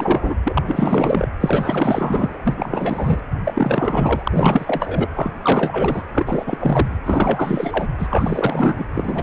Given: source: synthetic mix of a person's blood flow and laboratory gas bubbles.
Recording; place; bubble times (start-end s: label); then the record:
Doppler ultrasound of blood flow; precordium
0.00-0.36 s: bubbles
0.44-1.28 s: bubbles
1.40-2.38 s: bubbles
2.44-3.20 s: bubbles
3.45-4.23 s: bubbles
4.26-5.07 s: bubbles
5.16-5.33 s: bubbles
5.42-6.04 s: bubbles
6.12-6.98 s: bubbles
7.04-7.88 s: bubbles
7.99-8.84 s: bubbles
8.95-9.23 s: bubbles
From the record:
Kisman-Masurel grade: 444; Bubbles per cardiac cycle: continuous sound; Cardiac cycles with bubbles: 100%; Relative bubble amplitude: maximal (0.775 to 0.999); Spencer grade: 4 (maximum detectable bubble signal sounding continuously throughout systole and diastole of every cardiac period, and overriding the amplitude of the normal cardiac signals); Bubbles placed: anywhere in the cardiac cycle